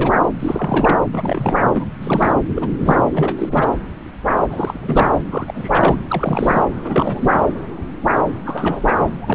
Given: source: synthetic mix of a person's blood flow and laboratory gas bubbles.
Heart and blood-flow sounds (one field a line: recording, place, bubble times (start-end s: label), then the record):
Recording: Doppler ultrasound of blood flow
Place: subclavian vein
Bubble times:
0.00-0.13 s: bubbles
0.35-0.98 s: bubbles
1.12-1.56 s: bubbles
1.74-1.86 s: bubbles
2.01-2.34 s: bubbles
2.55-2.75 s: bubbles
2.78-3.03 s: bubbles
3.13-3.34 s: bubbles
3.38-3.70 s: bubbles
4.50-5.11 s: bubbles
5.31-5.96 s: bubbles
6.09-6.64 s: bubbles
6.81-7.42 s: bubbles
8.45-9.06 s: bubbles
9.21-9.35 s: bubbles
From the record:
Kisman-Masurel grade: 332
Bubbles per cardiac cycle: rolling drumbeat, 9 or more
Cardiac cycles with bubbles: 50 to 99%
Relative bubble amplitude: moderate (0.250 to 0.450)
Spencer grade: 3 (all of the cardiac periods contain showers or single bubble signals, but not dominating or overriding the cardiac motion signals)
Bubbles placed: anywhere in the cardiac cycle